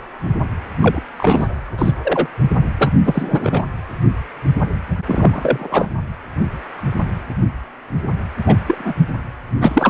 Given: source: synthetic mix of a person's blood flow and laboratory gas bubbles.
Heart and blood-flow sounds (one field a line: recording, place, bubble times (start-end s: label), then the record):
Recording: Doppler ultrasound of blood flow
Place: precordium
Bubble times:
0.81-1.01 s: bubbles
1.18-1.47 s: bubbles
1.78-1.94 s: bubbles
2.04-2.27 s: bubbles
2.78-2.93 s: bubbles
3.04-3.62 s: bubbles
5.07-5.92 s: bubbles
8.46-8.56 s: bubbles
8.68-8.95 s: bubbles
9.60-9.90 s: bubbles
From the record:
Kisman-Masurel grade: 233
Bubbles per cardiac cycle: several, 3 to 8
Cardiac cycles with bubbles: 50 to 99%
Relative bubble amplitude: loud (0.450 to 0.775)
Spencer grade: 3 (all of the cardiac periods contain showers or single bubble signals, but not dominating or overriding the cardiac motion signals)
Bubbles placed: anywhere in the cardiac cycle